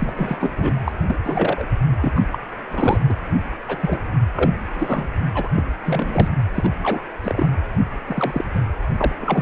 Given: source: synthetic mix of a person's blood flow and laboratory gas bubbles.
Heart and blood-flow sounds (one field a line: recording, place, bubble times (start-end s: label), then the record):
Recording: Doppler ultrasound of blood flow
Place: precordium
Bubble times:
0.00-0.38 s: bubbles
0.41-0.52 s: bubbles
0.57-0.73 s: bubbles
0.87-0.92 s: bubbles
1.06-1.16 s: bubbles
1.24-1.67 s: bubbles
2.01-2.12 s: bubbles
2.15-2.20 s: bubbles
2.32-2.38 s: bubbles
2.70-3.00 s: bubbles
3.09-3.14 s: bubbles
3.68-3.76 s: bubbles
3.80-3.99 s: bubbles
4.37-4.50 s: bubbles
4.74-5.08 s: bubbles
5.34-5.49 s: bubbles
5.57-5.63 s: bubbles
5.85-6.28 s: bubbles
6.54-6.71 s: bubbles
6.83-7.03 s: bubbles
7.24-7.48 s: bubbles
8.06-8.44 s: bubbles
8.54-8.61 s: bubbles
8.97-9.13 s: bubbles
9.21-9.42 s: bubbles
From the record:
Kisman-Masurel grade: 242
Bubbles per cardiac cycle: several, 3 to 8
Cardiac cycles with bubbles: 100%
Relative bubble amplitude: moderate (0.250 to 0.450)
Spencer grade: 3 (all of the cardiac periods contain showers or single bubble signals, but not dominating or overriding the cardiac motion signals)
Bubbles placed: anywhere in the cardiac cycle